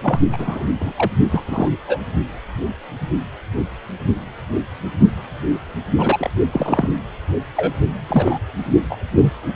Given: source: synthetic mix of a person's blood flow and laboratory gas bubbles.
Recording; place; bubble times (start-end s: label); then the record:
Doppler ultrasound of blood flow; precordium
0.02-0.20 s: bubbles
0.32-0.65 s: bubbles
0.80-0.92 s: bubbles
0.96-1.11 s: bubbles
1.31-1.45 s: bubbles
1.47-1.69 s: bubbles
1.88-1.98 s: bubbles
5.98-6.30 s: bubbles
6.52-6.89 s: bubbles
7.57-7.74 s: bubbles
8.08-8.38 s: bubbles
8.89-8.96 s: bubbles
9.12-9.31 s: bubbles
From the record:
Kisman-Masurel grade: 232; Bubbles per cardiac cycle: several, 3 to 8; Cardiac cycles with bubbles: 50 to 99%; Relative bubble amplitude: moderate (0.250 to 0.450); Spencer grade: 3 (all of the cardiac periods contain showers or single bubble signals, but not dominating or overriding the cardiac motion signals); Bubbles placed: only in the low amplitude regions of the cardiac cycle